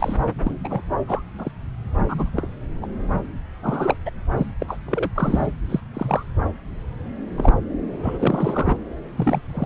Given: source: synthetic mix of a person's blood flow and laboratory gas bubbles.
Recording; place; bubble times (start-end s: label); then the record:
Doppler ultrasound of blood flow; subclavian vein
0.00-0.17 s: bubbles
0.44-0.54 s: bubbles
0.64-0.82 s: bubbles
1.07-1.22 s: bubbles
1.38-1.51 s: bubbles
2.08-2.31 s: bubbles
2.36-2.49 s: bubbles
2.82-2.87 s: bubbles
3.62-3.97 s: bubbles
4.05-4.10 s: bubbles
4.37-4.46 s: bubbles
4.59-4.78 s: bubbles
4.85-5.11 s: bubbles
5.15-5.47 s: bubbles
5.69-5.80 s: bubbles
5.93-6.23 s: bubbles
7.37-7.54 s: bubbles
8.03-8.77 s: bubbles
9.17-9.42 s: bubbles
9.50-9.65 s: bubbles
From the record:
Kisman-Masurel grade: 242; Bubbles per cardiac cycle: several, 3 to 8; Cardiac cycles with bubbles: 100%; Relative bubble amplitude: moderate (0.250 to 0.450); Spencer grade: 3 (all of the cardiac periods contain showers or single bubble signals, but not dominating or overriding the cardiac motion signals); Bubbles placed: anywhere in the cardiac cycle